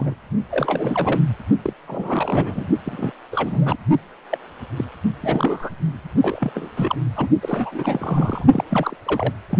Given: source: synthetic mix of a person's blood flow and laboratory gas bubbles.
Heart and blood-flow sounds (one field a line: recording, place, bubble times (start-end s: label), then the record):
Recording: Doppler ultrasound of blood flow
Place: precordium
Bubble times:
0.00-0.15 s: bubbles
0.51-1.21 s: bubbles
1.64-1.73 s: bubbles
1.87-2.67 s: bubbles
2.85-3.12 s: bubbles
3.32-3.77 s: bubbles
4.30-4.38 s: bubbles
4.77-4.85 s: bubbles
5.21-5.70 s: bubbles
6.22-6.71 s: bubbles
6.76-6.96 s: bubbles
7.15-7.29 s: bubbles
7.42-8.44 s: bubbles
8.53-8.64 s: bubbles
8.70-8.96 s: bubbles
9.05-9.34 s: bubbles
9.50-9.58 s: bubbles
From the record:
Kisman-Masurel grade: 342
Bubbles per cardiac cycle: rolling drumbeat, 9 or more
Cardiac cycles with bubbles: 100%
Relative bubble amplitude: moderate (0.250 to 0.450)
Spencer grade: 3 (all of the cardiac periods contain showers or single bubble signals, but not dominating or overriding the cardiac motion signals)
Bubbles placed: only in the low amplitude regions of the cardiac cycle